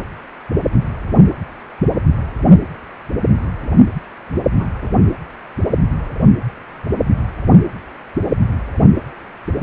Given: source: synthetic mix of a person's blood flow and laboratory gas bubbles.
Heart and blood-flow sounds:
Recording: Doppler ultrasound of blood flow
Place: precordium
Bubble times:
4.54-4.67 s: bubbles
4.81-4.88 s: bubbles
From the record:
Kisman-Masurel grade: 112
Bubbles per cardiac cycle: 1 to 2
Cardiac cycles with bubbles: 1 to 10%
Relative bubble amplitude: moderate (0.250 to 0.450)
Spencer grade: 1 (occasional bubble signal discernible with the cardiac motion signal, with majority of cardiac periods free of bubbles)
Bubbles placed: anywhere in the cardiac cycle

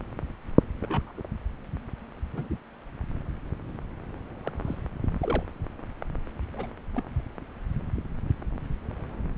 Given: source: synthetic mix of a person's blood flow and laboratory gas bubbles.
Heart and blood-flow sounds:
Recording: Doppler ultrasound of blood flow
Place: subclavian vein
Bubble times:
0.79-1.12 s: bubbles
1.17-1.22 s: bubbles
2.34-2.48 s: bubbles
2.50-2.55 s: bubbles
4.45-4.53 s: bubbles
4.64-4.77 s: bubbles
5.21-5.44 s: bubbles
6.53-6.66 s: bubbles
6.95-7.03 s: bubbles
From the record:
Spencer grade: 2 (many but less than half of the cardiac periods contain bubble signals, singularly or in groups)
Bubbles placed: anywhere in the cardiac cycle

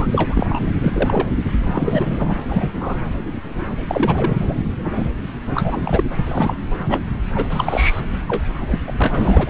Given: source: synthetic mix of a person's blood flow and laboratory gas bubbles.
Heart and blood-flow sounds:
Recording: Doppler ultrasound of blood flow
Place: subclavian vein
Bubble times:
0.00-0.07 s: bubbles
0.11-0.46 s: bubbles
0.49-0.66 s: bubbles
0.81-1.28 s: bubbles
1.61-2.35 s: bubbles
2.49-2.69 s: bubbles
2.80-2.96 s: bubbles
3.89-4.63 s: bubbles
4.82-5.09 s: bubbles
5.54-6.04 s: bubbles
6.26-6.56 s: bubbles
6.88-6.99 s: bubbles
7.35-7.47 s: bubbles
7.49-8.02 s: bubbles
8.28-8.43 s: bubbles
8.66-8.78 s: bubbles
8.87-8.92 s: bubbles
8.97-9.49 s: bubbles
From the record:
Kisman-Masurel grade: 233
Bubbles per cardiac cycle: several, 3 to 8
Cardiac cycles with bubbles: 50 to 99%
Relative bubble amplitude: loud (0.450 to 0.775)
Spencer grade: 3 (all of the cardiac periods contain showers or single bubble signals, but not dominating or overriding the cardiac motion signals)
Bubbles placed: anywhere in the cardiac cycle

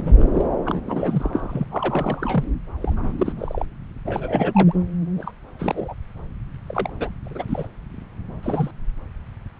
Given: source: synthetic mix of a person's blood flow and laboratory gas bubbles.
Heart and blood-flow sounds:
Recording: Doppler ultrasound of blood flow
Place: subclavian vein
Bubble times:
0.00-0.14 s: bubbles
0.18-0.25 s: bubbles
0.33-0.45 s: bubbles
0.65-1.65 s: bubbles
1.71-2.44 s: bubbles
2.81-3.13 s: bubbles
3.18-3.33 s: bubbles
3.38-3.65 s: bubbles
4.05-4.74 s: bubbles
5.17-5.32 s: bubbles
5.59-5.95 s: bubbles
6.67-6.90 s: bubbles
6.99-7.10 s: bubbles
7.25-7.67 s: bubbles
8.43-8.71 s: bubbles
From the record:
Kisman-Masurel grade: 242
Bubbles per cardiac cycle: several, 3 to 8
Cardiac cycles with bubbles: 100%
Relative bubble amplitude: moderate (0.250 to 0.450)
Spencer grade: 3 (all of the cardiac periods contain showers or single bubble signals, but not dominating or overriding the cardiac motion signals)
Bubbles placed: anywhere in the cardiac cycle

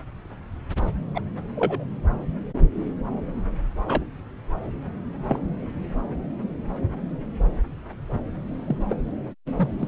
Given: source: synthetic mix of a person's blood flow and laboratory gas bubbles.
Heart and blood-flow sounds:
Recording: Doppler ultrasound of blood flow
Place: subclavian vein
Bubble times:
1.15-1.20 s: bubbles
1.55-1.84 s: bubbles
3.85-4.05 s: bubbles
5.28-5.39 s: bubbles
8.45-8.78 s: bubbles
8.89-8.96 s: bubbles
9.57-9.70 s: bubbles
9.80-9.88 s: bubbles
From the record:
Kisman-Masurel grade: 121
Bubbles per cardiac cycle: 1 to 2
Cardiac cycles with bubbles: 10 to 50%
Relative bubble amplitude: barely perceptible (0.100 to 0.250)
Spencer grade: 2 (many but less than half of the cardiac periods contain bubble signals, singularly or in groups)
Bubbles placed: anywhere in the cardiac cycle

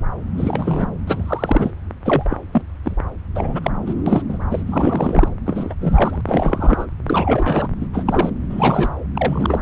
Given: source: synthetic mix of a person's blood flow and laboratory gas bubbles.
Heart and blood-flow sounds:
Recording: Doppler ultrasound of blood flow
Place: subclavian vein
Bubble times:
0.38-0.88 s: bubbles
1.07-1.71 s: bubbles
2.05-2.38 s: bubbles
2.52-2.62 s: bubbles
2.85-2.96 s: bubbles
3.35-3.71 s: bubbles
3.86-3.94 s: bubbles
4.06-4.22 s: bubbles
4.29-4.38 s: bubbles
4.50-4.63 s: bubbles
4.67-5.28 s: bubbles
5.46-5.75 s: bubbles
5.80-6.21 s: bubbles
6.26-6.87 s: bubbles
7.07-7.68 s: bubbles
7.81-7.86 s: bubbles
7.93-8.29 s: bubbles
8.49-8.90 s: bubbles
9.14-9.61 s: bubbles
From the record:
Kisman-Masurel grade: 232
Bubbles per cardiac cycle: several, 3 to 8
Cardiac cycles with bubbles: 50 to 99%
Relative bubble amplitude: moderate (0.250 to 0.450)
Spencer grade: 3 (all of the cardiac periods contain showers or single bubble signals, but not dominating or overriding the cardiac motion signals)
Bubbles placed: anywhere in the cardiac cycle

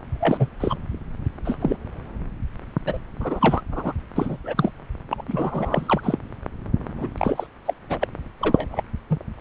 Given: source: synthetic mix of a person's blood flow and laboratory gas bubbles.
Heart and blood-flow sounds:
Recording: Doppler ultrasound of blood flow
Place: subclavian vein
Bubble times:
0.20-0.49 s: bubbles
0.60-0.76 s: bubbles
1.44-1.78 s: bubbles
2.85-2.98 s: bubbles
3.19-3.61 s: bubbles
3.71-3.93 s: bubbles
4.15-4.37 s: bubbles
4.44-4.71 s: bubbles
5.08-5.25 s: bubbles
5.28-6.19 s: bubbles
6.97-7.08 s: bubbles
7.18-7.47 s: bubbles
7.65-7.74 s: bubbles
7.90-8.07 s: bubbles
8.39-8.84 s: bubbles
9.09-9.18 s: bubbles
9.38-9.41 s: bubbles
From the record:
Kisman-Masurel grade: 243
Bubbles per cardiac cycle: several, 3 to 8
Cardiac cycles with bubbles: 100%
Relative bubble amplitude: loud (0.450 to 0.775)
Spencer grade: 3 (all of the cardiac periods contain showers or single bubble signals, but not dominating or overriding the cardiac motion signals)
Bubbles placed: anywhere in the cardiac cycle

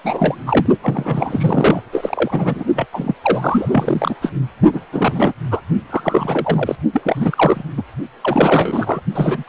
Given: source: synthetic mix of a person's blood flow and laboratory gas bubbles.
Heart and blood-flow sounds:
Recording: Doppler ultrasound of blood flow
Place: precordium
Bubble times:
0.04-0.35 s: bubbles
0.46-0.66 s: bubbles
0.82-1.82 s: bubbles
1.92-2.64 s: bubbles
2.75-2.86 s: bubbles
2.93-3.15 s: bubbles
3.22-4.14 s: bubbles
4.21-4.32 s: bubbles
4.72-4.80 s: bubbles
4.92-5.33 s: bubbles
5.50-5.61 s: bubbles
5.89-6.75 s: bubbles
6.93-7.63 s: bubbles
7.77-7.83 s: bubbles
8.21-9.01 s: bubbles
9.15-9.49 s: bubbles
From the record:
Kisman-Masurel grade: 343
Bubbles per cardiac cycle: rolling drumbeat, 9 or more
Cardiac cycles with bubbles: 100%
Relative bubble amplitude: loud (0.450 to 0.775)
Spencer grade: 3 (all of the cardiac periods contain showers or single bubble signals, but not dominating or overriding the cardiac motion signals)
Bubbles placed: only in the low amplitude regions of the cardiac cycle

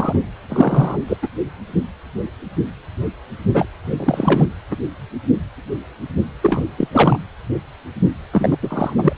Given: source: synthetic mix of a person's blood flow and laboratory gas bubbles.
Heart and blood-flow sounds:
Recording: Doppler ultrasound of blood flow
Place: precordium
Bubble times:
0.00-0.20 s: bubbles
0.49-0.99 s: bubbles
1.08-1.17 s: bubbles
1.22-1.28 s: bubbles
3.54-3.68 s: bubbles
3.97-4.46 s: bubbles
4.71-4.76 s: bubbles
6.42-6.66 s: bubbles
6.78-6.88 s: bubbles
6.92-7.17 s: bubbles
8.31-8.57 s: bubbles
8.62-8.93 s: bubbles
8.97-9.13 s: bubbles
From the record:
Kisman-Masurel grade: 333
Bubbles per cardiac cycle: rolling drumbeat, 9 or more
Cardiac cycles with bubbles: 50 to 99%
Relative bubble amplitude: loud (0.450 to 0.775)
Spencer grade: 3 (all of the cardiac periods contain showers or single bubble signals, but not dominating or overriding the cardiac motion signals)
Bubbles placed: anywhere in the cardiac cycle

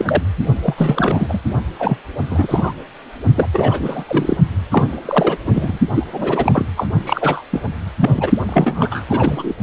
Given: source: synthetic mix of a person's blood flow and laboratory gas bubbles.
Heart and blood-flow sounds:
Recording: Doppler ultrasound of blood flow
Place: precordium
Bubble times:
0.00-0.22 s: bubbles
0.62-0.74 s: bubbles
0.77-1.39 s: bubbles
1.78-1.98 s: bubbles
2.30-2.73 s: bubbles
3.35-3.47 s: bubbles
3.53-4.04 s: bubbles
4.06-4.37 s: bubbles
4.71-4.96 s: bubbles
5.05-5.38 s: bubbles
5.45-5.78 s: bubbles
5.93-6.04 s: bubbles
6.12-6.66 s: bubbles
6.76-6.87 s: bubbles
7.05-7.42 s: bubbles
7.51-7.61 s: bubbles
8.00-8.31 s: bubbles
8.49-9.04 s: bubbles
9.09-9.54 s: bubbles
From the record:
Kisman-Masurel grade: 343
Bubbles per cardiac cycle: rolling drumbeat, 9 or more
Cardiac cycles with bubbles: 100%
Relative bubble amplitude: loud (0.450 to 0.775)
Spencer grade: 3 (all of the cardiac periods contain showers or single bubble signals, but not dominating or overriding the cardiac motion signals)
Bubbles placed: only in the low amplitude regions of the cardiac cycle

